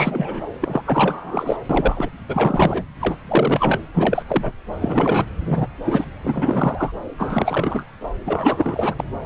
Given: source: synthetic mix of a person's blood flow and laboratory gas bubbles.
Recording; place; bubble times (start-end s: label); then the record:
Doppler ultrasound of blood flow; subclavian vein
0.00-0.44 s: bubbles
0.61-0.82 s: bubbles
0.85-1.57 s: bubbles
1.70-2.09 s: bubbles
2.28-2.83 s: bubbles
3.00-3.17 s: bubbles
3.28-3.79 s: bubbles
3.94-4.22 s: bubbles
4.27-4.52 s: bubbles
4.81-5.25 s: bubbles
5.45-5.67 s: bubbles
5.85-6.04 s: bubbles
6.24-6.91 s: bubbles
7.18-7.84 s: bubbles
8.26-8.94 s: bubbles
8.99-9.04 s: bubbles
9.22-9.26 s: bubbles
From the record:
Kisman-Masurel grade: 342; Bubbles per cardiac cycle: rolling drumbeat, 9 or more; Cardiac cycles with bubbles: 100%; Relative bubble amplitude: moderate (0.250 to 0.450); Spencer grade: 3 (all of the cardiac periods contain showers or single bubble signals, but not dominating or overriding the cardiac motion signals); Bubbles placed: anywhere in the cardiac cycle